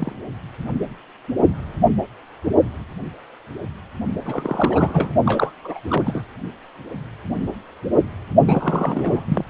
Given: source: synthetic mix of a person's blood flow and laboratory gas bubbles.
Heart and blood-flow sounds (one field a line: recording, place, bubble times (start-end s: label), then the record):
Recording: Doppler ultrasound of blood flow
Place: precordium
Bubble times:
0.00-0.13 s: bubbles
4.25-5.10 s: bubbles
5.25-5.54 s: bubbles
5.64-5.80 s: bubbles
5.89-6.21 s: bubbles
8.46-9.45 s: bubbles
From the record:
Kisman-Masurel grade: 332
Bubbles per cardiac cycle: rolling drumbeat, 9 or more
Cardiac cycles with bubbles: 50 to 99%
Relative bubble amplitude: moderate (0.250 to 0.450)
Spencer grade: 3 (all of the cardiac periods contain showers or single bubble signals, but not dominating or overriding the cardiac motion signals)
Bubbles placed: only in the low amplitude regions of the cardiac cycle